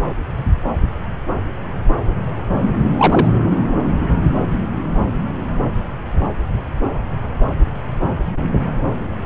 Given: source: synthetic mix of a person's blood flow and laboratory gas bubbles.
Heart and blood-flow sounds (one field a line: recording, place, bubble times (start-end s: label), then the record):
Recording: Doppler ultrasound of blood flow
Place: subclavian vein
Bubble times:
2.97-3.27 s: bubbles
From the record:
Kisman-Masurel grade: 113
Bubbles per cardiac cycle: 1 to 2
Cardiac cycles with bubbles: 1 to 10%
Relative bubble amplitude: loud (0.450 to 0.775)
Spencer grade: 1 (occasional bubble signal discernible with the cardiac motion signal, with majority of cardiac periods free of bubbles)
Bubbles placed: anywhere in the cardiac cycle